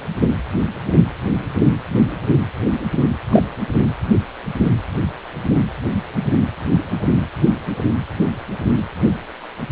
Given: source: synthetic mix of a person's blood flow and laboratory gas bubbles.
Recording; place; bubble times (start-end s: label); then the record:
Doppler ultrasound of blood flow; precordium
3.30-3.43 s: bubbles
From the record:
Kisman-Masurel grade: 113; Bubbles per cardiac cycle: 1 to 2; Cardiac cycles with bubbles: 1 to 10%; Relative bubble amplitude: loud (0.450 to 0.775); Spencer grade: 1 (occasional bubble signal discernible with the cardiac motion signal, with majority of cardiac periods free of bubbles); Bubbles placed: anywhere in the cardiac cycle